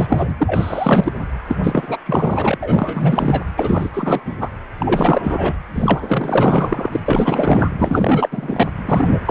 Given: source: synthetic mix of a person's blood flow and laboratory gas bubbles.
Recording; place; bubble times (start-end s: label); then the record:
Doppler ultrasound of blood flow; precordium
0.00-0.35 s: bubbles
0.38-1.11 s: bubbles
1.48-1.57 s: bubbles
1.63-1.98 s: bubbles
2.05-2.58 s: bubbles
2.62-3.44 s: bubbles
3.56-3.90 s: bubbles
3.93-4.21 s: bubbles
4.26-4.37 s: bubbles
4.40-4.50 s: bubbles
4.79-5.59 s: bubbles
5.75-7.00 s: bubbles
7.05-7.72 s: bubbles
7.78-8.68 s: bubbles
8.86-9.20 s: bubbles
9.25-9.31 s: bubbles
From the record:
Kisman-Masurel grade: 444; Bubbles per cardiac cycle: continuous sound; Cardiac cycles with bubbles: 100%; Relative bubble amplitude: maximal (0.775 to 0.999); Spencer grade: 4 (maximum detectable bubble signal sounding continuously throughout systole and diastole of every cardiac period, and overriding the amplitude of the normal cardiac signals); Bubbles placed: anywhere in the cardiac cycle